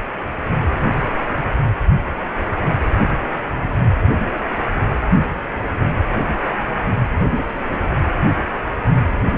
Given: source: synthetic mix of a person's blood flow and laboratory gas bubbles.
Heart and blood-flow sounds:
Doppler ultrasound of blood flow; precordium
no bubbles
From the record:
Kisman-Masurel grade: 000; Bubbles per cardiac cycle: 0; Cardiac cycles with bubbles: 0%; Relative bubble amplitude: no bubbles discernible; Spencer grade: 0 (complete lack of bubble signals)

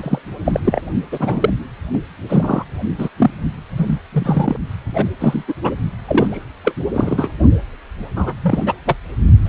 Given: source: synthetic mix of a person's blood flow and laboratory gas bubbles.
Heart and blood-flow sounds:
Doppler ultrasound of blood flow; precordium
0.00-0.19 s: bubbles
0.45-0.60 s: bubbles
0.65-0.81 s: bubbles
1.11-1.50 s: bubbles
1.93-1.98 s: bubbles
2.29-2.65 s: bubbles
2.98-3.08 s: bubbles
3.17-3.31 s: bubbles
3.77-3.99 s: bubbles
4.12-4.56 s: bubbles
4.94-5.08 s: bubbles
5.20-5.44 s: bubbles
5.47-5.54 s: bubbles
5.62-5.74 s: bubbles
6.04-6.44 s: bubbles
6.64-6.74 s: bubbles
6.93-7.29 s: bubbles
8.16-8.34 s: bubbles
8.42-8.74 s: bubbles
8.86-8.96 s: bubbles
9.45-9.49 s: bubbles
From the record:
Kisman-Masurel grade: 243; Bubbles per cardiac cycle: several, 3 to 8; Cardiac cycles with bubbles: 100%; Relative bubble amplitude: loud (0.450 to 0.775); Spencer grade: 3 (all of the cardiac periods contain showers or single bubble signals, but not dominating or overriding the cardiac motion signals); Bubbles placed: only in the low amplitude regions of the cardiac cycle

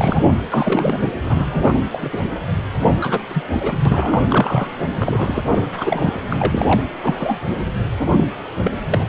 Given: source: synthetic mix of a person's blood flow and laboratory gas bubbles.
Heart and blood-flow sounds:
Doppler ultrasound of blood flow; precordium
0.00-0.37 s: bubbles
0.50-1.09 s: bubbles
1.22-1.80 s: bubbles
1.92-1.99 s: bubbles
2.02-2.09 s: bubbles
2.12-2.19 s: bubbles
2.98-3.25 s: bubbles
3.28-3.43 s: bubbles
3.60-3.79 s: bubbles
3.85-4.22 s: bubbles
4.29-4.71 s: bubbles
4.96-5.70 s: bubbles
5.77-6.18 s: bubbles
6.30-6.83 s: bubbles
7.02-7.38 s: bubbles
7.99-8.11 s: bubbles
8.16-8.31 s: bubbles
8.57-8.80 s: bubbles
8.90-9.06 s: bubbles
From the record:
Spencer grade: 3 (all of the cardiac periods contain showers or single bubble signals, but not dominating or overriding the cardiac motion signals); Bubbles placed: anywhere in the cardiac cycle

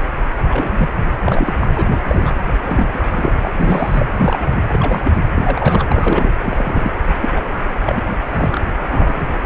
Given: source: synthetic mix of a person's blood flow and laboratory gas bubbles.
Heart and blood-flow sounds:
Doppler ultrasound of blood flow; precordium
0.48-0.93 s: bubbles
1.24-1.53 s: bubbles
1.59-1.67 s: bubbles
1.75-1.85 s: bubbles
1.90-2.00 s: bubbles
2.04-2.31 s: bubbles
2.63-2.86 s: bubbles
2.92-3.32 s: bubbles
3.41-4.06 s: bubbles
4.17-4.62 s: bubbles
4.70-5.00 s: bubbles
5.04-5.12 s: bubbles
5.35-5.85 s: bubbles
5.89-6.31 s: bubbles
6.42-6.91 s: bubbles
7.08-7.13 s: bubbles
7.21-7.29 s: bubbles
7.35-7.41 s: bubbles
7.84-8.03 s: bubbles
8.09-8.18 s: bubbles
8.23-8.61 s: bubbles
8.77-9.46 s: bubbles
From the record:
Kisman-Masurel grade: 242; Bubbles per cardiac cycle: several, 3 to 8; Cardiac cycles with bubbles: 100%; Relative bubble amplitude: moderate (0.250 to 0.450); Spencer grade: 3 (all of the cardiac periods contain showers or single bubble signals, but not dominating or overriding the cardiac motion signals); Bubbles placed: anywhere in the cardiac cycle

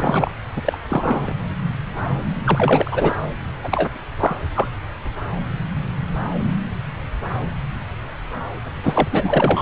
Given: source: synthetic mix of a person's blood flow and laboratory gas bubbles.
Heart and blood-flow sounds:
Doppler ultrasound of blood flow; subclavian vein
0.00-0.31 s: bubbles
0.56-0.62 s: bubbles
0.64-0.78 s: bubbles
0.89-1.33 s: bubbles
2.44-3.17 s: bubbles
3.64-3.88 s: bubbles
4.19-4.36 s: bubbles
4.55-4.68 s: bubbles
8.83-9.08 s: bubbles
9.12-9.62 s: bubbles
From the record:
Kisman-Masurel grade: 233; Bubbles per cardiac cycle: several, 3 to 8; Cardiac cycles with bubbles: 50 to 99%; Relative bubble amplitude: loud (0.450 to 0.775); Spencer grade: 3 (all of the cardiac periods contain showers or single bubble signals, but not dominating or overriding the cardiac motion signals); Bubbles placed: anywhere in the cardiac cycle

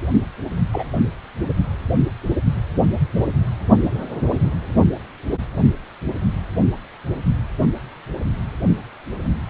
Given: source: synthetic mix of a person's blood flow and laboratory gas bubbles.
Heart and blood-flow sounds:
Doppler ultrasound of blood flow; precordium
0.72-0.84 s: bubbles
0.95-0.99 s: bubbles
From the record:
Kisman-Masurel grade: 112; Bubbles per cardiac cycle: 1 to 2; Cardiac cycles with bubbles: 1 to 10%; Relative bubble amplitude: moderate (0.250 to 0.450); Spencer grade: 1 (occasional bubble signal discernible with the cardiac motion signal, with majority of cardiac periods free of bubbles); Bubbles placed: only in the low amplitude regions of the cardiac cycle

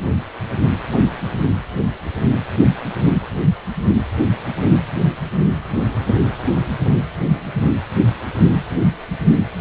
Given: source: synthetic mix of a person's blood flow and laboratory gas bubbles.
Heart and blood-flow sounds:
Doppler ultrasound of blood flow; precordium
no bubbles
From the record:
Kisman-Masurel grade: 000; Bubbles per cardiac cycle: 0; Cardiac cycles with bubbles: 0%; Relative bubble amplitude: no bubbles discernible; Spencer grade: 0 (complete lack of bubble signals)

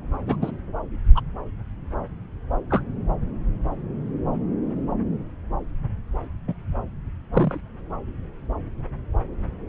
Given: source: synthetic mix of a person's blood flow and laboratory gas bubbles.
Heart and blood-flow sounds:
Doppler ultrasound of blood flow; subclavian vein
0.26-0.37 s: bubbles
0.41-0.51 s: bubbles
1.15-1.22 s: bubbles
2.69-2.81 s: bubbles
6.47-6.54 s: bubbles
7.33-7.60 s: bubbles
From the record:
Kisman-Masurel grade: 123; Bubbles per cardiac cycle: 1 to 2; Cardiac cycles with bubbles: 10 to 50%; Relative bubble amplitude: loud (0.450 to 0.775); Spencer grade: 2 (many but less than half of the cardiac periods contain bubble signals, singularly or in groups); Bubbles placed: anywhere in the cardiac cycle

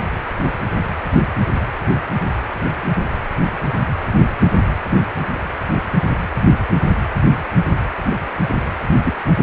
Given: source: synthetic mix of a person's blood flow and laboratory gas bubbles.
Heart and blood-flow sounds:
Doppler ultrasound of blood flow; precordium
9.04-9.13 s: bubbles
9.40-9.43 s: bubbles
From the record:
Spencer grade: 1 (occasional bubble signal discernible with the cardiac motion signal, with majority of cardiac periods free of bubbles); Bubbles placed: anywhere in the cardiac cycle

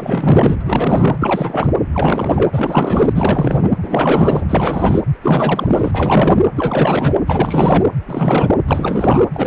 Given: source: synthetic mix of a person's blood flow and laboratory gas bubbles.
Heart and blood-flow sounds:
Doppler ultrasound of blood flow; precordium
0.00-0.57 s: bubbles
0.60-0.63 s: bubbles
0.66-1.73 s: bubbles
1.93-3.71 s: bubbles
3.82-4.46 s: bubbles
4.49-5.01 s: bubbles
5.22-5.92 s: bubbles
5.94-6.40 s: bubbles
6.55-7.18 s: bubbles
7.26-7.85 s: bubbles
8.07-8.57 s: bubbles
8.67-9.25 s: bubbles
9.34-9.47 s: bubbles
From the record:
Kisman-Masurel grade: 444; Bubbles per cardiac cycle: continuous sound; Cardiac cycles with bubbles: 100%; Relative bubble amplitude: maximal (0.775 to 0.999); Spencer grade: 4 (maximum detectable bubble signal sounding continuously throughout systole and diastole of every cardiac period, and overriding the amplitude of the normal cardiac signals); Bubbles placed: anywhere in the cardiac cycle

